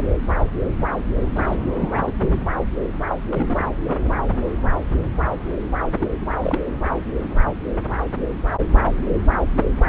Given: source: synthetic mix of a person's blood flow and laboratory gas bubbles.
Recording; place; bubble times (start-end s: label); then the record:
Doppler ultrasound of blood flow; subclavian vein
1.35-1.57 s: bubbles
1.79-2.12 s: bubbles
2.21-2.29 s: bubbles
3.09-3.15 s: bubbles
3.29-3.65 s: bubbles
3.85-3.96 s: bubbles
4.02-4.09 s: bubbles
6.00-6.07 s: bubbles
6.21-6.25 s: bubbles
6.40-6.60 s: bubbles
9.86-9.89 s: bubbles
From the record:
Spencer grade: 3 (all of the cardiac periods contain showers or single bubble signals, but not dominating or overriding the cardiac motion signals); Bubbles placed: anywhere in the cardiac cycle